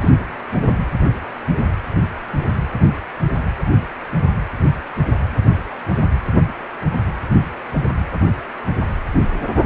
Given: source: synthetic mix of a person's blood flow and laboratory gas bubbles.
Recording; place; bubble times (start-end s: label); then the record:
Doppler ultrasound of blood flow; precordium
0.01-0.13 s: bubbles
From the record:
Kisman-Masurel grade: 112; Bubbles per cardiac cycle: 1 to 2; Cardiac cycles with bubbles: 1 to 10%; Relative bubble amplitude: moderate (0.250 to 0.450); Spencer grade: 1 (occasional bubble signal discernible with the cardiac motion signal, with majority of cardiac periods free of bubbles); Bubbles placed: anywhere in the cardiac cycle